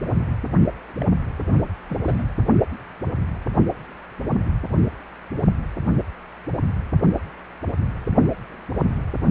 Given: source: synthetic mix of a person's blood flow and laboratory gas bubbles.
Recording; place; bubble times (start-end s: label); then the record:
Doppler ultrasound of blood flow; precordium
1.00-1.04 s: bubbles
1.49-1.72 s: bubbles
1.90-2.28 s: bubbles
From the record:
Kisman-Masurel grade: 211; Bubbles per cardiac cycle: several, 3 to 8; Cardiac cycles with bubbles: 1 to 10%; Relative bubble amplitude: barely perceptible (0.100 to 0.250); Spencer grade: 1 (occasional bubble signal discernible with the cardiac motion signal, with majority of cardiac periods free of bubbles); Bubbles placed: only in the low amplitude regions of the cardiac cycle